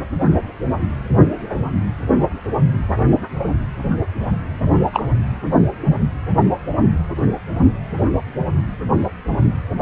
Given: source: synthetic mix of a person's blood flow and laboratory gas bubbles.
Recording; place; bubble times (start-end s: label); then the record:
Doppler ultrasound of blood flow; precordium
4.93-5.04 s: bubbles
From the record:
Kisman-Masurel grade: 123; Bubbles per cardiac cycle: 1 to 2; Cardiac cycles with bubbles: 10 to 50%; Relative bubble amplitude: loud (0.450 to 0.775); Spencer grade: 2 (many but less than half of the cardiac periods contain bubble signals, singularly or in groups); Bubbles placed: anywhere in the cardiac cycle